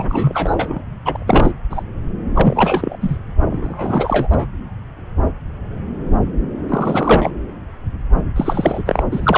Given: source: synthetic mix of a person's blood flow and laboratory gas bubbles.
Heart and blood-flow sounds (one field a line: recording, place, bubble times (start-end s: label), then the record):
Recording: Doppler ultrasound of blood flow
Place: subclavian vein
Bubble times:
0.00-0.06 s: bubbles
0.10-0.84 s: bubbles
1.04-1.24 s: bubbles
1.27-1.51 s: bubbles
1.70-1.83 s: bubbles
2.35-2.97 s: bubbles
3.00-3.18 s: bubbles
3.50-4.28 s: bubbles
4.30-4.46 s: bubbles
6.69-7.31 s: bubbles
8.36-8.82 s: bubbles
8.85-9.03 s: bubbles
9.11-9.38 s: bubbles
From the record:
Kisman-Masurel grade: 333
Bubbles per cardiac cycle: rolling drumbeat, 9 or more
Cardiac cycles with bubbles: 50 to 99%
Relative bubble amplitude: loud (0.450 to 0.775)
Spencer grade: 3 (all of the cardiac periods contain showers or single bubble signals, but not dominating or overriding the cardiac motion signals)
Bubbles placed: anywhere in the cardiac cycle